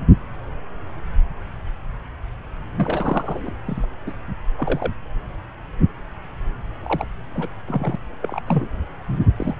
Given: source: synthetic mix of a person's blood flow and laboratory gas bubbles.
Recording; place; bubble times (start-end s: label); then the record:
Doppler ultrasound of blood flow; subclavian vein
2.75-3.53 s: bubbles
3.67-3.85 s: bubbles
4.06-4.14 s: bubbles
4.58-4.92 s: bubbles
6.83-7.07 s: bubbles
7.34-7.49 s: bubbles
7.68-7.96 s: bubbles
8.21-8.41 s: bubbles
8.47-8.68 s: bubbles
9.38-9.54 s: bubbles
From the record:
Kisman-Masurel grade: 221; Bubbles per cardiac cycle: several, 3 to 8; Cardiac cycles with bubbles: 10 to 50%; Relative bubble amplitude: barely perceptible (0.100 to 0.250); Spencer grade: 2 (many but less than half of the cardiac periods contain bubble signals, singularly or in groups); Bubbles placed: anywhere in the cardiac cycle